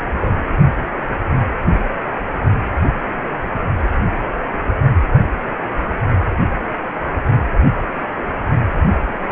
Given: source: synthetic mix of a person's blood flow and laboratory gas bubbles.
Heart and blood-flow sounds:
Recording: Doppler ultrasound of blood flow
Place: precordium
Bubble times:
0.21-0.33 s: bubbles
From the record:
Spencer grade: 1 (occasional bubble signal discernible with the cardiac motion signal, with majority of cardiac periods free of bubbles)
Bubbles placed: anywhere in the cardiac cycle

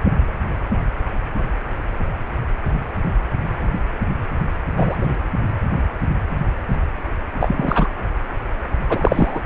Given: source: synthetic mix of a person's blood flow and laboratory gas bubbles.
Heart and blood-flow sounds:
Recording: Doppler ultrasound of blood flow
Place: precordium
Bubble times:
4.77-4.97 s: bubbles
5.01-5.14 s: bubbles
7.40-7.88 s: bubbles
8.89-9.41 s: bubbles
From the record:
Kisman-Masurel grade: 223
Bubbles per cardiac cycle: several, 3 to 8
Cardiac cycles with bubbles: 10 to 50%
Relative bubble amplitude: loud (0.450 to 0.775)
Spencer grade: 2 (many but less than half of the cardiac periods contain bubble signals, singularly or in groups)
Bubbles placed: anywhere in the cardiac cycle

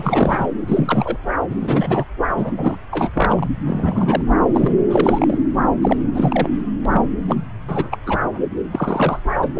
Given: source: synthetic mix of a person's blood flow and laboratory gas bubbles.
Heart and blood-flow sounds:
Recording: Doppler ultrasound of blood flow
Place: subclavian vein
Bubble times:
0.00-0.46 s: bubbles
0.67-1.17 s: bubbles
1.50-1.55 s: bubbles
1.60-2.04 s: bubbles
2.36-2.52 s: bubbles
2.58-2.76 s: bubbles
2.91-3.10 s: bubbles
3.13-3.48 s: bubbles
3.67-4.22 s: bubbles
4.53-4.76 s: bubbles
4.89-5.38 s: bubbles
5.81-5.96 s: bubbles
6.14-6.48 s: bubbles
6.85-6.88 s: bubbles
6.92-7.02 s: bubbles
7.28-7.36 s: bubbles
7.68-7.98 s: bubbles
8.07-8.18 s: bubbles
8.71-9.20 s: bubbles
9.42-9.46 s: bubbles
9.54-9.60 s: bubbles
From the record:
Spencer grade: 3 (all of the cardiac periods contain showers or single bubble signals, but not dominating or overriding the cardiac motion signals)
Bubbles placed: anywhere in the cardiac cycle

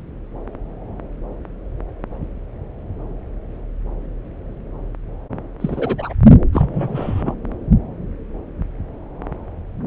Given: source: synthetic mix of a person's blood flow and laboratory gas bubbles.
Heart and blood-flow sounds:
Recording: Doppler ultrasound of blood flow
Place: subclavian vein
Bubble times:
5.60-6.13 s: bubbles
6.52-7.35 s: bubbles
From the record:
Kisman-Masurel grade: 212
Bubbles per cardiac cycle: several, 3 to 8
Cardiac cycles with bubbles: 1 to 10%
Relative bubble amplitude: moderate (0.250 to 0.450)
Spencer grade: 1 (occasional bubble signal discernible with the cardiac motion signal, with majority of cardiac periods free of bubbles)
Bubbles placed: anywhere in the cardiac cycle

